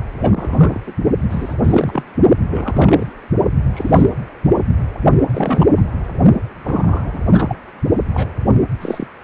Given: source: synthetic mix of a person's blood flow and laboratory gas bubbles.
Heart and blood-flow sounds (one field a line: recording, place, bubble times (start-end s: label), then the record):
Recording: Doppler ultrasound of blood flow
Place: precordium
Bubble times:
0.17-0.82 s: bubbles
0.86-0.93 s: bubbles
1.30-1.54 s: bubbles
1.63-2.04 s: bubbles
2.50-3.10 s: bubbles
3.74-4.09 s: bubbles
5.29-5.67 s: bubbles
5.76-5.81 s: bubbles
6.63-7.55 s: bubbles
8.13-8.26 s: bubbles
8.80-9.07 s: bubbles
From the record:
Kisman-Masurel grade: 242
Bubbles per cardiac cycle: several, 3 to 8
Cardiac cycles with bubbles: 100%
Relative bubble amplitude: moderate (0.250 to 0.450)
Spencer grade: 3 (all of the cardiac periods contain showers or single bubble signals, but not dominating or overriding the cardiac motion signals)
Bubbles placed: only in the low amplitude regions of the cardiac cycle